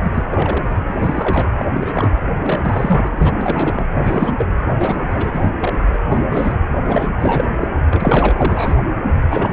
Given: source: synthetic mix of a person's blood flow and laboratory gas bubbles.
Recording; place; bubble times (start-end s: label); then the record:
Doppler ultrasound of blood flow; precordium
0.03-0.23 s: bubbles
0.28-0.75 s: bubbles
0.86-1.50 s: bubbles
1.58-1.71 s: bubbles
1.73-2.10 s: bubbles
2.42-3.38 s: bubbles
3.41-3.86 s: bubbles
3.94-4.34 s: bubbles
4.38-4.46 s: bubbles
4.79-5.50 s: bubbles
5.59-5.73 s: bubbles
5.92-5.98 s: bubbles
6.08-6.22 s: bubbles
6.28-6.57 s: bubbles
6.88-7.10 s: bubbles
7.20-7.67 s: bubbles
7.90-8.85 s: bubbles
9.29-9.53 s: bubbles
From the record:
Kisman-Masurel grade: 342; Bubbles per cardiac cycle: rolling drumbeat, 9 or more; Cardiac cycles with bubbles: 100%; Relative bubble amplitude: moderate (0.250 to 0.450); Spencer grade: 3 (all of the cardiac periods contain showers or single bubble signals, but not dominating or overriding the cardiac motion signals); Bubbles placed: anywhere in the cardiac cycle